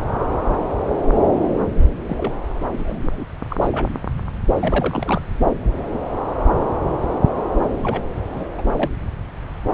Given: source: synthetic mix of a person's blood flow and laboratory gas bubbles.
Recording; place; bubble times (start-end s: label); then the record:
Doppler ultrasound of blood flow; subclavian vein
2.06-2.33 s: bubbles
2.73-3.25 s: bubbles
3.49-3.56 s: bubbles
3.61-3.87 s: bubbles
4.59-5.21 s: bubbles
7.83-8.02 s: bubbles
8.29-8.47 s: bubbles
8.57-8.62 s: bubbles
8.77-8.91 s: bubbles
From the record:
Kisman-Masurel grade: 221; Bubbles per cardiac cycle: several, 3 to 8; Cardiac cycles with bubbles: 10 to 50%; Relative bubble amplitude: barely perceptible (0.100 to 0.250); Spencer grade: 2 (many but less than half of the cardiac periods contain bubble signals, singularly or in groups); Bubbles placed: anywhere in the cardiac cycle